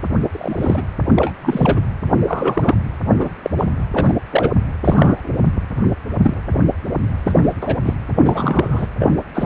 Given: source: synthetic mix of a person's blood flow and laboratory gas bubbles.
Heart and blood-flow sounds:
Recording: Doppler ultrasound of blood flow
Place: precordium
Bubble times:
0.32-0.83 s: bubbles
1.16-1.32 s: bubbles
1.42-1.80 s: bubbles
2.27-2.75 s: bubbles
3.19-3.30 s: bubbles
3.44-3.50 s: bubbles
3.58-3.65 s: bubbles
3.94-4.14 s: bubbles
4.30-4.51 s: bubbles
4.84-5.31 s: bubbles
6.22-6.34 s: bubbles
7.25-7.54 s: bubbles
7.62-7.79 s: bubbles
7.85-7.94 s: bubbles
8.18-8.88 s: bubbles
8.98-9.20 s: bubbles
9.34-9.46 s: bubbles
From the record:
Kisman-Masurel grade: 233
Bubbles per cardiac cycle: several, 3 to 8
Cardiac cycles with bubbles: 50 to 99%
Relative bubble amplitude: loud (0.450 to 0.775)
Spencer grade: 3 (all of the cardiac periods contain showers or single bubble signals, but not dominating or overriding the cardiac motion signals)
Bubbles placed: anywhere in the cardiac cycle

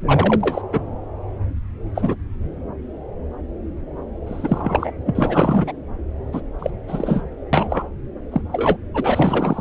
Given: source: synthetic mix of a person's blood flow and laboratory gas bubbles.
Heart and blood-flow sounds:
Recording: Doppler ultrasound of blood flow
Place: subclavian vein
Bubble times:
0.05-0.61 s: bubbles
0.72-0.80 s: bubbles
1.94-2.15 s: bubbles
4.26-4.92 s: bubbles
5.06-5.72 s: bubbles
6.32-6.41 s: bubbles
6.59-6.71 s: bubbles
6.88-7.22 s: bubbles
7.53-7.88 s: bubbles
8.31-8.42 s: bubbles
8.52-8.79 s: bubbles
8.94-9.61 s: bubbles
From the record:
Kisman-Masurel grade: 233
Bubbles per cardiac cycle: several, 3 to 8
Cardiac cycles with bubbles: 50 to 99%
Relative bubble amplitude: loud (0.450 to 0.775)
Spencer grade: 3 (all of the cardiac periods contain showers or single bubble signals, but not dominating or overriding the cardiac motion signals)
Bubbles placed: anywhere in the cardiac cycle

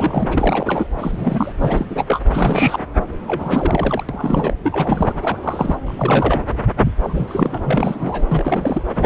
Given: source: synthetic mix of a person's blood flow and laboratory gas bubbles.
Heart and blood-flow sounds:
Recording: Doppler ultrasound of blood flow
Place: subclavian vein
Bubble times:
0.00-0.87 s: bubbles
0.99-1.52 s: bubbles
1.60-1.86 s: bubbles
1.90-2.05 s: bubbles
2.08-2.19 s: bubbles
2.33-2.79 s: bubbles
3.27-4.04 s: bubbles
4.09-4.54 s: bubbles
4.63-5.12 s: bubbles
5.22-5.37 s: bubbles
5.42-5.78 s: bubbles
5.87-6.41 s: bubbles
7.04-8.24 s: bubbles
8.28-8.82 s: bubbles
8.95-9.06 s: bubbles
From the record:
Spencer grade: 3 (all of the cardiac periods contain showers or single bubble signals, but not dominating or overriding the cardiac motion signals)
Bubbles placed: anywhere in the cardiac cycle

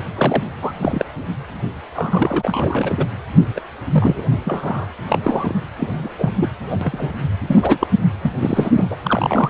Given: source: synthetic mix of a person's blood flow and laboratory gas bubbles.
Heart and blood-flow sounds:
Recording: Doppler ultrasound of blood flow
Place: precordium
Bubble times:
0.15-0.42 s: bubbles
0.61-0.71 s: bubbles
0.74-0.78 s: bubbles
0.81-1.05 s: bubbles
1.94-3.06 s: bubbles
3.56-3.60 s: bubbles
3.91-4.23 s: bubbles
4.45-4.87 s: bubbles
5.09-5.56 s: bubbles
5.77-6.10 s: bubbles
6.18-6.29 s: bubbles
6.39-6.49 s: bubbles
6.69-6.78 s: bubbles
6.81-7.11 s: bubbles
7.46-7.87 s: bubbles
8.21-8.32 s: bubbles
8.38-8.71 s: bubbles
8.77-8.96 s: bubbles
9.05-9.50 s: bubbles
From the record:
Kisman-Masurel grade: 242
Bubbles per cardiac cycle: several, 3 to 8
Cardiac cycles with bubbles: 100%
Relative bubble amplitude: moderate (0.250 to 0.450)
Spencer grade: 3 (all of the cardiac periods contain showers or single bubble signals, but not dominating or overriding the cardiac motion signals)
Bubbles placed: anywhere in the cardiac cycle

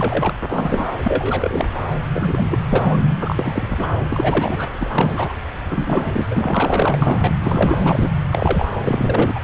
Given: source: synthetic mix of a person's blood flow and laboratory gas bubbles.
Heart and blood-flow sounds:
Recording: Doppler ultrasound of blood flow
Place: subclavian vein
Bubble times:
0.00-0.33 s: bubbles
0.49-0.87 s: bubbles
1.03-1.67 s: bubbles
2.12-2.58 s: bubbles
2.73-2.98 s: bubbles
3.20-3.94 s: bubbles
4.10-4.71 s: bubbles
4.74-5.34 s: bubbles
5.70-6.27 s: bubbles
6.30-6.99 s: bubbles
7.02-7.33 s: bubbles
7.40-7.78 s: bubbles
7.83-8.09 s: bubbles
8.29-8.65 s: bubbles
8.84-9.39 s: bubbles
From the record:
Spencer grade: 3 (all of the cardiac periods contain showers or single bubble signals, but not dominating or overriding the cardiac motion signals)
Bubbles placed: anywhere in the cardiac cycle

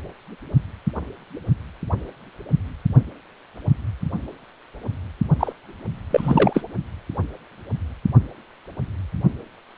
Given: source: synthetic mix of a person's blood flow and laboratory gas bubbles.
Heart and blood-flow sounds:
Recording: Doppler ultrasound of blood flow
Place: precordium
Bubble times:
5.40-5.53 s: bubbles
6.11-6.62 s: bubbles
From the record:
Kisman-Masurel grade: 213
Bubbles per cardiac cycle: several, 3 to 8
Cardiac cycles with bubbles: 1 to 10%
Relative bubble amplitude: loud (0.450 to 0.775)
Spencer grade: 1 (occasional bubble signal discernible with the cardiac motion signal, with majority of cardiac periods free of bubbles)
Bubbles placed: only in the low amplitude regions of the cardiac cycle

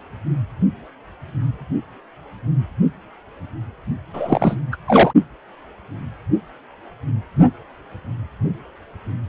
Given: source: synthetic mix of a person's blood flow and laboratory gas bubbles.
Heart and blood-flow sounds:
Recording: Doppler ultrasound of blood flow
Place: precordium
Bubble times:
4.13-4.57 s: bubbles
4.71-4.77 s: bubbles
4.87-5.12 s: bubbles
From the record:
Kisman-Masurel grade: 213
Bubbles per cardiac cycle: several, 3 to 8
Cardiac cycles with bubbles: 1 to 10%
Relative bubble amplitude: loud (0.450 to 0.775)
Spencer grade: 1 (occasional bubble signal discernible with the cardiac motion signal, with majority of cardiac periods free of bubbles)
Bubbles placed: only in the low amplitude regions of the cardiac cycle

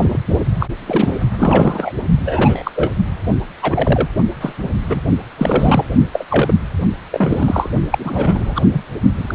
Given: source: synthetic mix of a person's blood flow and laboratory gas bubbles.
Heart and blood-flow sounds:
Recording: Doppler ultrasound of blood flow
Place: precordium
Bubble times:
0.00-0.18 s: bubbles
0.59-0.67 s: bubbles
0.86-1.20 s: bubbles
1.35-1.92 s: bubbles
2.25-2.71 s: bubbles
2.75-2.92 s: bubbles
3.62-4.08 s: bubbles
4.41-4.53 s: bubbles
4.58-4.68 s: bubbles
4.88-5.00 s: bubbles
5.38-5.84 s: bubbles
6.12-6.25 s: bubbles
6.29-6.54 s: bubbles
7.12-7.70 s: bubbles
7.91-8.62 s: bubbles
8.73-8.82 s: bubbles
9.15-9.35 s: bubbles
From the record:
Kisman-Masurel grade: 243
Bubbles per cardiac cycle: several, 3 to 8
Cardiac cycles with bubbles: 100%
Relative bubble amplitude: loud (0.450 to 0.775)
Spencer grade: 3 (all of the cardiac periods contain showers or single bubble signals, but not dominating or overriding the cardiac motion signals)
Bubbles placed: only in the low amplitude regions of the cardiac cycle

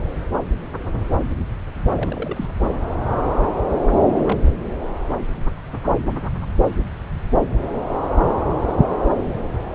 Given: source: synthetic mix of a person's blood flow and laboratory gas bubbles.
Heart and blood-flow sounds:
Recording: Doppler ultrasound of blood flow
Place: subclavian vein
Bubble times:
1.95-2.52 s: bubbles
4.15-4.36 s: bubbles
4.63-4.70 s: bubbles
From the record:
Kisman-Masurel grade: 221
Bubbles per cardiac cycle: several, 3 to 8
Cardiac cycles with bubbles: 10 to 50%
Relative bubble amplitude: barely perceptible (0.100 to 0.250)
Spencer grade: 2 (many but less than half of the cardiac periods contain bubble signals, singularly or in groups)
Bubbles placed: anywhere in the cardiac cycle

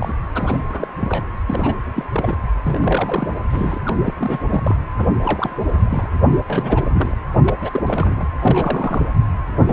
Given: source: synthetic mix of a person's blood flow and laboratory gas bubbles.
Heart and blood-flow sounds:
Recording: Doppler ultrasound of blood flow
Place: precordium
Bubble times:
0.00-0.14 s: bubbles
0.34-0.60 s: bubbles
0.69-0.88 s: bubbles
1.00-1.26 s: bubbles
1.46-1.77 s: bubbles
1.93-2.04 s: bubbles
2.12-2.37 s: bubbles
2.62-3.33 s: bubbles
3.50-3.78 s: bubbles
3.85-3.96 s: bubbles
4.06-4.13 s: bubbles
4.17-4.42 s: bubbles
4.50-4.75 s: bubbles
4.99-5.06 s: bubbles
5.23-5.56 s: bubbles
5.62-6.10 s: bubbles
6.27-6.38 s: bubbles
6.47-7.17 s: bubbles
7.44-7.54 s: bubbles
7.62-8.29 s: bubbles
8.40-9.13 s: bubbles
9.59-9.73 s: bubbles
From the record:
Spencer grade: 3 (all of the cardiac periods contain showers or single bubble signals, but not dominating or overriding the cardiac motion signals)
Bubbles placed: anywhere in the cardiac cycle

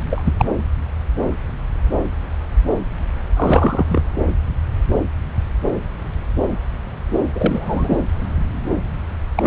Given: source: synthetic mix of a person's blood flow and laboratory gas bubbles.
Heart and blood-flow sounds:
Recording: Doppler ultrasound of blood flow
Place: subclavian vein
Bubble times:
0.11-0.33 s: bubbles
0.37-0.45 s: bubbles
3.36-3.85 s: bubbles
3.89-4.02 s: bubbles
7.35-7.97 s: bubbles
9.36-9.47 s: bubbles
From the record:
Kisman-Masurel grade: 222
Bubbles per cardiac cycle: several, 3 to 8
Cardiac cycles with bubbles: 10 to 50%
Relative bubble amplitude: moderate (0.250 to 0.450)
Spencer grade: 2 (many but less than half of the cardiac periods contain bubble signals, singularly or in groups)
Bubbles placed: anywhere in the cardiac cycle

